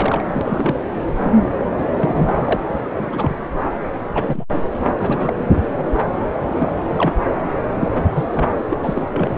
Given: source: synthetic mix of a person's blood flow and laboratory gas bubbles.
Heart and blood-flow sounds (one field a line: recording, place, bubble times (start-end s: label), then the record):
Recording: Doppler ultrasound of blood flow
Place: subclavian vein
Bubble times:
0.00-0.42 s: bubbles
0.44-0.75 s: bubbles
1.14-1.34 s: bubbles
1.94-2.60 s: bubbles
2.83-3.36 s: bubbles
4.14-4.45 s: bubbles
4.87-4.92 s: bubbles
4.99-5.33 s: bubbles
5.36-5.46 s: bubbles
6.50-6.71 s: bubbles
6.91-7.16 s: bubbles
7.79-7.89 s: bubbles
8.14-8.46 s: bubbles
8.70-8.77 s: bubbles
8.83-9.07 s: bubbles
9.13-9.38 s: bubbles
From the record:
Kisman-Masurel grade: 242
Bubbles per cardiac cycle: several, 3 to 8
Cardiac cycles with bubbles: 100%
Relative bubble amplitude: moderate (0.250 to 0.450)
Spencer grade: 3 (all of the cardiac periods contain showers or single bubble signals, but not dominating or overriding the cardiac motion signals)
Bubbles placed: anywhere in the cardiac cycle